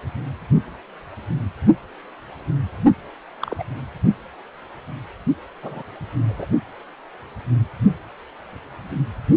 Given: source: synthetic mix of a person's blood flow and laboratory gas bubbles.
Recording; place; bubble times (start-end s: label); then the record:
Doppler ultrasound of blood flow; precordium
3.42-3.56 s: bubbles
3.58-3.63 s: bubbles
5.62-5.83 s: bubbles
6.29-6.46 s: bubbles
From the record:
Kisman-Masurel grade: 121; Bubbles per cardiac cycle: 1 to 2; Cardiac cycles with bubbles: 10 to 50%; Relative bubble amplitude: barely perceptible (0.100 to 0.250); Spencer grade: 2 (many but less than half of the cardiac periods contain bubble signals, singularly or in groups); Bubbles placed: only in the low amplitude regions of the cardiac cycle